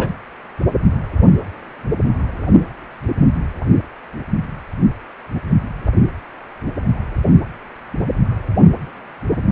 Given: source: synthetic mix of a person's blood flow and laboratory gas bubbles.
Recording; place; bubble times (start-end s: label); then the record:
Doppler ultrasound of blood flow; precordium
0.00-0.11 s: bubbles
From the record:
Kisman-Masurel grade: 213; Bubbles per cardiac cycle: several, 3 to 8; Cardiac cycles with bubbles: 1 to 10%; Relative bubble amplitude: loud (0.450 to 0.775); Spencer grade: 1 (occasional bubble signal discernible with the cardiac motion signal, with majority of cardiac periods free of bubbles); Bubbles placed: anywhere in the cardiac cycle